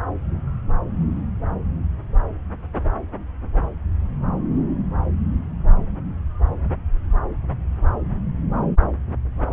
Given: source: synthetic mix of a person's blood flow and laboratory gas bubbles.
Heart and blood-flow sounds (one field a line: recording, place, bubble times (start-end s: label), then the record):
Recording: Doppler ultrasound of blood flow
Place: subclavian vein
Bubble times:
no bubbles
From the record:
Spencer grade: 0 (complete lack of bubble signals)